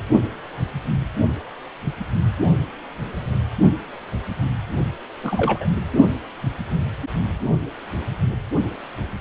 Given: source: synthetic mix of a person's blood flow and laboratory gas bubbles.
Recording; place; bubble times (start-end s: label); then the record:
Doppler ultrasound of blood flow; precordium
5.23-5.68 s: bubbles
From the record:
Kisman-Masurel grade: 222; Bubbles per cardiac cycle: several, 3 to 8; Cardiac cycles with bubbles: 10 to 50%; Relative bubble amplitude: moderate (0.250 to 0.450); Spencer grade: 2 (many but less than half of the cardiac periods contain bubble signals, singularly or in groups); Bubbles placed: only in the low amplitude regions of the cardiac cycle